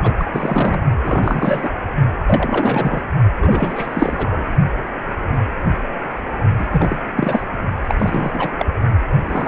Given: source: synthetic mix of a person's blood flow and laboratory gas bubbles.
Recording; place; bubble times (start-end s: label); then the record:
Doppler ultrasound of blood flow; precordium
0.02-0.13 s: bubbles
0.17-0.26 s: bubbles
0.33-0.83 s: bubbles
1.04-1.69 s: bubbles
2.27-3.03 s: bubbles
3.38-4.48 s: bubbles
6.58-6.67 s: bubbles
6.73-6.99 s: bubbles
7.17-7.44 s: bubbles
7.87-8.50 s: bubbles
8.59-8.65 s: bubbles
9.26-9.48 s: bubbles
From the record:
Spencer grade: 3 (all of the cardiac periods contain showers or single bubble signals, but not dominating or overriding the cardiac motion signals); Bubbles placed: only in the low amplitude regions of the cardiac cycle